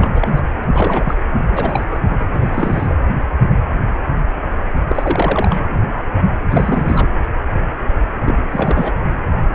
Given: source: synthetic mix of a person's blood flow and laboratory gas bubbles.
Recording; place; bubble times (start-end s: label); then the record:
Doppler ultrasound of blood flow; precordium
0.00-0.42 s: bubbles
0.60-0.64 s: bubbles
0.73-1.17 s: bubbles
1.40-1.88 s: bubbles
1.90-2.00 s: bubbles
2.27-2.96 s: bubbles
4.88-5.79 s: bubbles
6.50-7.08 s: bubbles
8.24-8.40 s: bubbles
8.49-8.95 s: bubbles
From the record:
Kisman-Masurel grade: 332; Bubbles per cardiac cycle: rolling drumbeat, 9 or more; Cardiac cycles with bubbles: 50 to 99%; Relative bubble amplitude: moderate (0.250 to 0.450); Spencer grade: 3 (all of the cardiac periods contain showers or single bubble signals, but not dominating or overriding the cardiac motion signals); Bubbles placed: anywhere in the cardiac cycle